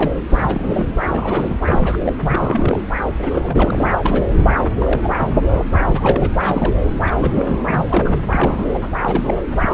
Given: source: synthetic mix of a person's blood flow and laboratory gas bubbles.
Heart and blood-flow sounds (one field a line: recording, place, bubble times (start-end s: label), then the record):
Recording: Doppler ultrasound of blood flow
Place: subclavian vein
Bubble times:
0.00-0.16 s: bubbles
0.29-0.85 s: bubbles
1.00-1.56 s: bubbles
1.60-1.98 s: bubbles
2.01-2.15 s: bubbles
2.20-2.81 s: bubbles
3.19-3.98 s: bubbles
4.03-4.24 s: bubbles
4.33-4.56 s: bubbles
4.78-5.10 s: bubbles
5.17-5.32 s: bubbles
5.46-5.63 s: bubbles
5.72-6.31 s: bubbles
6.37-6.82 s: bubbles
7.06-7.12 s: bubbles
7.15-7.60 s: bubbles
7.67-8.14 s: bubbles
8.28-8.89 s: bubbles
9.02-9.43 s: bubbles
9.62-9.74 s: bubbles
From the record:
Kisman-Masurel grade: 342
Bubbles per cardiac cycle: rolling drumbeat, 9 or more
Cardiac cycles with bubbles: 100%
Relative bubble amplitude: moderate (0.250 to 0.450)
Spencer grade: 3 (all of the cardiac periods contain showers or single bubble signals, but not dominating or overriding the cardiac motion signals)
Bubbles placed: anywhere in the cardiac cycle